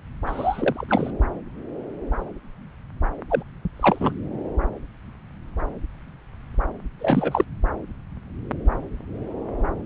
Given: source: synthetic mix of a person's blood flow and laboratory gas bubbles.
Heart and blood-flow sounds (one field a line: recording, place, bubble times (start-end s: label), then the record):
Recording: Doppler ultrasound of blood flow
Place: subclavian vein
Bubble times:
0.26-1.10 s: bubbles
3.29-3.43 s: bubbles
3.76-4.17 s: bubbles
6.99-7.44 s: bubbles
From the record:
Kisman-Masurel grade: 222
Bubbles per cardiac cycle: several, 3 to 8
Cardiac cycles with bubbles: 10 to 50%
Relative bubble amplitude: moderate (0.250 to 0.450)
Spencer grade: 2 (many but less than half of the cardiac periods contain bubble signals, singularly or in groups)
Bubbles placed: anywhere in the cardiac cycle